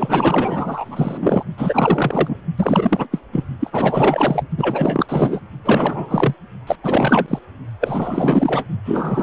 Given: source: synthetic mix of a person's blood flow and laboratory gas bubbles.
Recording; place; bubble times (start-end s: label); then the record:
Doppler ultrasound of blood flow; precordium
0.00-1.43 s: bubbles
1.57-2.38 s: bubbles
2.57-3.07 s: bubbles
3.11-3.19 s: bubbles
3.31-3.44 s: bubbles
3.60-4.44 s: bubbles
4.58-5.06 s: bubbles
5.08-5.40 s: bubbles
5.64-6.34 s: bubbles
6.67-6.76 s: bubbles
6.83-7.39 s: bubbles
7.79-8.64 s: bubbles
8.85-9.22 s: bubbles
From the record:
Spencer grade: 4 (maximum detectable bubble signal sounding continuously throughout systole and diastole of every cardiac period, and overriding the amplitude of the normal cardiac signals); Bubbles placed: only in the low amplitude regions of the cardiac cycle